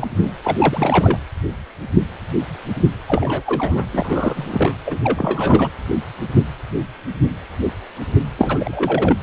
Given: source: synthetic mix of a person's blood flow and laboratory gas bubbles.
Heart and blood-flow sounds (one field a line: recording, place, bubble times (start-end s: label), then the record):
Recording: Doppler ultrasound of blood flow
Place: precordium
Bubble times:
0.00-0.07 s: bubbles
0.22-0.31 s: bubbles
0.44-1.18 s: bubbles
3.08-3.43 s: bubbles
3.46-3.90 s: bubbles
3.92-4.75 s: bubbles
4.85-4.98 s: bubbles
5.03-5.70 s: bubbles
8.38-9.17 s: bubbles
From the record:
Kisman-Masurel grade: 332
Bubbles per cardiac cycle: rolling drumbeat, 9 or more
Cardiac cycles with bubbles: 50 to 99%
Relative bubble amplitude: moderate (0.250 to 0.450)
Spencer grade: 3 (all of the cardiac periods contain showers or single bubble signals, but not dominating or overriding the cardiac motion signals)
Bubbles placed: anywhere in the cardiac cycle